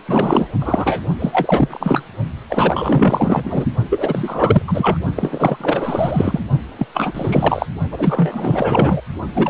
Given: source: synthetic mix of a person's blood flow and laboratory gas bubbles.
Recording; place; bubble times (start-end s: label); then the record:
Doppler ultrasound of blood flow; precordium
0.07-0.48 s: bubbles
0.60-1.02 s: bubbles
1.19-2.03 s: bubbles
2.49-3.65 s: bubbles
3.90-4.62 s: bubbles
4.68-4.98 s: bubbles
5.16-6.40 s: bubbles
6.78-6.87 s: bubbles
6.94-7.66 s: bubbles
7.91-9.02 s: bubbles
9.34-9.50 s: bubbles
From the record:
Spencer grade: 4 (maximum detectable bubble signal sounding continuously throughout systole and diastole of every cardiac period, and overriding the amplitude of the normal cardiac signals); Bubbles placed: only in the low amplitude regions of the cardiac cycle